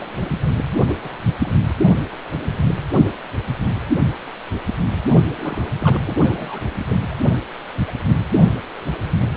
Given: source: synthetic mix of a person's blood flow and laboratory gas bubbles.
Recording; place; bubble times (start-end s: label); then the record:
Doppler ultrasound of blood flow; precordium
0.00-0.17 s: bubbles
0.21-0.29 s: bubbles
0.87-0.95 s: bubbles
1.02-1.17 s: bubbles
1.21-1.59 s: bubbles
5.36-5.71 s: bubbles
5.79-6.71 s: bubbles
6.79-6.86 s: bubbles
6.88-6.96 s: bubbles
7.09-7.15 s: bubbles
7.29-7.40 s: bubbles
7.88-7.92 s: bubbles
9.32-9.37 s: bubbles
From the record:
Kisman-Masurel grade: 221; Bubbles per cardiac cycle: several, 3 to 8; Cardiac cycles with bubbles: 10 to 50%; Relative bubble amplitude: barely perceptible (0.100 to 0.250); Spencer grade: 2 (many but less than half of the cardiac periods contain bubble signals, singularly or in groups); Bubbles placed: anywhere in the cardiac cycle